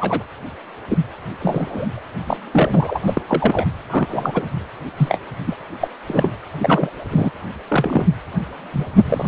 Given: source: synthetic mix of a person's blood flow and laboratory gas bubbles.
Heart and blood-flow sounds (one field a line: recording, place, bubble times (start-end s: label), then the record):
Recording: Doppler ultrasound of blood flow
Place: precordium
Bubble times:
0.00-0.23 s: bubbles
0.89-0.97 s: bubbles
1.40-1.88 s: bubbles
1.94-1.99 s: bubbles
2.27-2.37 s: bubbles
2.52-3.01 s: bubbles
3.06-3.21 s: bubbles
3.27-3.65 s: bubbles
3.90-4.45 s: bubbles
4.97-5.20 s: bubbles
5.46-5.57 s: bubbles
5.81-5.88 s: bubbles
6.06-6.33 s: bubbles
6.58-6.90 s: bubbles
7.11-7.31 s: bubbles
7.68-8.06 s: bubbles
8.72-8.85 s: bubbles
9.04-9.28 s: bubbles
From the record:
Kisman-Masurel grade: 242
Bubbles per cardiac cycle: several, 3 to 8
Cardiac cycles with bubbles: 100%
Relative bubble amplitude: moderate (0.250 to 0.450)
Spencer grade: 3 (all of the cardiac periods contain showers or single bubble signals, but not dominating or overriding the cardiac motion signals)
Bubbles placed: anywhere in the cardiac cycle